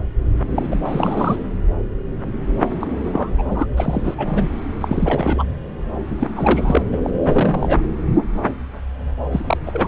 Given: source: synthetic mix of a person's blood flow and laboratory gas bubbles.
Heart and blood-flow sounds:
Doppler ultrasound of blood flow; subclavian vein
0.55-0.76 s: bubbles
0.85-1.36 s: bubbles
2.81-2.87 s: bubbles
3.02-3.31 s: bubbles
3.38-3.67 s: bubbles
3.77-4.15 s: bubbles
4.17-4.48 s: bubbles
4.81-5.44 s: bubbles
6.10-6.16 s: bubbles
6.20-6.27 s: bubbles
6.36-6.82 s: bubbles
6.92-7.00 s: bubbles
7.04-7.10 s: bubbles
7.24-7.79 s: bubbles
9.30-9.44 s: bubbles
9.46-9.58 s: bubbles
9.66-9.88 s: bubbles
From the record:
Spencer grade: 3 (all of the cardiac periods contain showers or single bubble signals, but not dominating or overriding the cardiac motion signals); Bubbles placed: anywhere in the cardiac cycle

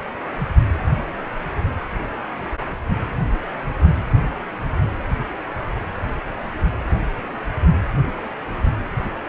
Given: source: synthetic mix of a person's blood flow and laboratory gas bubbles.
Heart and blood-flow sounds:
Doppler ultrasound of blood flow; precordium
no bubbles
From the record:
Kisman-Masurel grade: 000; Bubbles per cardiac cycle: 0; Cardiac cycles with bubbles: 0%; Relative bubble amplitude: no bubbles discernible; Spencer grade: 0 (complete lack of bubble signals)

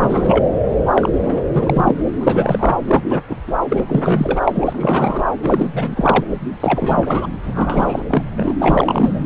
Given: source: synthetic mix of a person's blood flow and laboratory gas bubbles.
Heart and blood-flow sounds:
Doppler ultrasound of blood flow; subclavian vein
0.00-0.51 s: bubbles
0.95-1.09 s: bubbles
1.22-1.42 s: bubbles
1.52-1.95 s: bubbles
2.18-2.76 s: bubbles
2.87-3.04 s: bubbles
3.09-3.19 s: bubbles
3.28-3.37 s: bubbles
3.47-3.53 s: bubbles
3.70-3.85 s: bubbles
3.88-4.52 s: bubbles
4.54-5.25 s: bubbles
5.42-5.69 s: bubbles
5.73-6.24 s: bubbles
6.59-7.29 s: bubbles
7.42-8.06 s: bubbles
8.10-8.23 s: bubbles
8.37-8.54 s: bubbles
8.59-9.26 s: bubbles
From the record:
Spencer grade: 3 (all of the cardiac periods contain showers or single bubble signals, but not dominating or overriding the cardiac motion signals); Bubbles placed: anywhere in the cardiac cycle

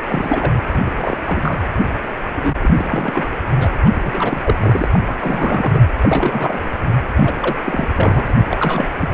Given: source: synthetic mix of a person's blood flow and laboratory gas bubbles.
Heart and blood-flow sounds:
Doppler ultrasound of blood flow; precordium
0.07-0.52 s: bubbles
0.74-0.79 s: bubbles
0.86-0.91 s: bubbles
0.97-1.18 s: bubbles
1.26-1.61 s: bubbles
2.35-2.53 s: bubbles
2.62-3.29 s: bubbles
3.58-3.67 s: bubbles
3.85-3.90 s: bubbles
3.94-4.54 s: bubbles
4.60-4.86 s: bubbles
4.93-4.99 s: bubbles
5.05-5.15 s: bubbles
5.19-5.82 s: bubbles
6.02-6.71 s: bubbles
7.16-7.55 s: bubbles
7.64-7.88 s: bubbles
7.93-8.26 s: bubbles
8.29-8.33 s: bubbles
8.50-8.57 s: bubbles
8.59-8.88 s: bubbles
8.98-9.09 s: bubbles
9.12-9.14 s: bubbles
From the record:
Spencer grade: 3 (all of the cardiac periods contain showers or single bubble signals, but not dominating or overriding the cardiac motion signals); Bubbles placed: anywhere in the cardiac cycle

